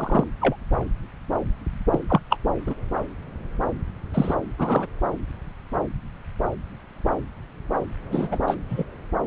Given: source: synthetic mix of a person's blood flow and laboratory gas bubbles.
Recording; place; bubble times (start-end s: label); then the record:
Doppler ultrasound of blood flow; subclavian vein
0.00-0.24 s: bubbles
0.41-0.56 s: bubbles
1.91-1.99 s: bubbles
2.08-2.20 s: bubbles
2.30-2.37 s: bubbles
2.67-2.75 s: bubbles
4.13-4.34 s: bubbles
4.58-4.86 s: bubbles
8.12-8.28 s: bubbles
8.31-8.38 s: bubbles
8.47-8.56 s: bubbles
8.69-8.85 s: bubbles
From the record:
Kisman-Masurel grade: 232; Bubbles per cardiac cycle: several, 3 to 8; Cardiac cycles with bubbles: 50 to 99%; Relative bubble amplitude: moderate (0.250 to 0.450); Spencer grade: 3 (all of the cardiac periods contain showers or single bubble signals, but not dominating or overriding the cardiac motion signals); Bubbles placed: anywhere in the cardiac cycle